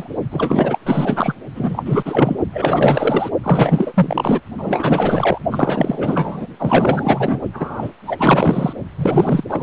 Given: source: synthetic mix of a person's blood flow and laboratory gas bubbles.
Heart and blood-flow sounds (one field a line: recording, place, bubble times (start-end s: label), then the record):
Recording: Doppler ultrasound of blood flow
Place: precordium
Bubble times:
0.00-0.09 s: bubbles
0.32-0.79 s: bubbles
0.86-1.33 s: bubbles
1.55-2.02 s: bubbles
2.05-2.39 s: bubbles
2.53-3.30 s: bubbles
3.43-4.40 s: bubbles
4.58-5.39 s: bubbles
5.51-6.46 s: bubbles
6.58-7.39 s: bubbles
7.53-7.90 s: bubbles
8.07-8.73 s: bubbles
8.97-9.44 s: bubbles
9.49-9.63 s: bubbles
From the record:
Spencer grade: 4 (maximum detectable bubble signal sounding continuously throughout systole and diastole of every cardiac period, and overriding the amplitude of the normal cardiac signals)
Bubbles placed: only in the low amplitude regions of the cardiac cycle